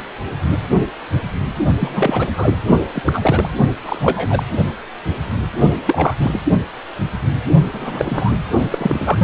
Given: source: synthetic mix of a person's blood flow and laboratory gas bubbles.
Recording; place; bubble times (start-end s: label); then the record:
Doppler ultrasound of blood flow; precordium
1.80-2.31 s: bubbles
2.37-2.54 s: bubbles
2.95-3.02 s: bubbles
3.05-3.49 s: bubbles
3.85-4.43 s: bubbles
5.86-6.14 s: bubbles
6.19-6.39 s: bubbles
7.72-8.32 s: bubbles
8.71-9.24 s: bubbles
From the record:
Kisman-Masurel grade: 232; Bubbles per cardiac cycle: several, 3 to 8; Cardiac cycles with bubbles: 50 to 99%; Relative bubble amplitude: moderate (0.250 to 0.450); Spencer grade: 3 (all of the cardiac periods contain showers or single bubble signals, but not dominating or overriding the cardiac motion signals); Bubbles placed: only in the low amplitude regions of the cardiac cycle